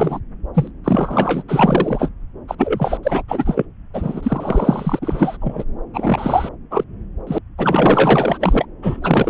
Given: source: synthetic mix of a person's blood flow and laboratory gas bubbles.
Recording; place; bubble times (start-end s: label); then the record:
Doppler ultrasound of blood flow; subclavian vein
0.00-0.19 s: bubbles
0.55-0.71 s: bubbles
0.84-1.43 s: bubbles
1.48-2.09 s: bubbles
2.47-2.55 s: bubbles
2.58-2.97 s: bubbles
3.03-3.22 s: bubbles
3.28-3.65 s: bubbles
3.94-5.37 s: bubbles
5.41-5.64 s: bubbles
5.94-6.49 s: bubbles
6.71-6.84 s: bubbles
7.27-7.39 s: bubbles
7.58-8.66 s: bubbles
8.82-9.30 s: bubbles
From the record:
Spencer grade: 4 (maximum detectable bubble signal sounding continuously throughout systole and diastole of every cardiac period, and overriding the amplitude of the normal cardiac signals); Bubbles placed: anywhere in the cardiac cycle